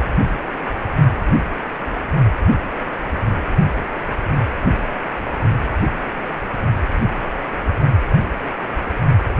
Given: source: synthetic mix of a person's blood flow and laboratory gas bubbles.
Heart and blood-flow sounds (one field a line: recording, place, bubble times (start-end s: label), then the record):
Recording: Doppler ultrasound of blood flow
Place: precordium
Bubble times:
no bubbles
From the record:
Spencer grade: 0 (complete lack of bubble signals)